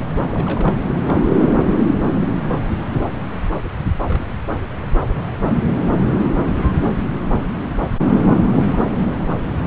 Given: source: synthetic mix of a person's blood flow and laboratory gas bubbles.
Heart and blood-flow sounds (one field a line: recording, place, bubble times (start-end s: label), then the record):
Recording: Doppler ultrasound of blood flow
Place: subclavian vein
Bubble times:
0.34-0.76 s: bubbles
1.08-1.14 s: bubbles
1.26-1.31 s: bubbles
4.06-4.33 s: bubbles
5.12-5.24 s: bubbles
8.25-8.29 s: bubbles
From the record:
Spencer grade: 2 (many but less than half of the cardiac periods contain bubble signals, singularly or in groups)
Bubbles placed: anywhere in the cardiac cycle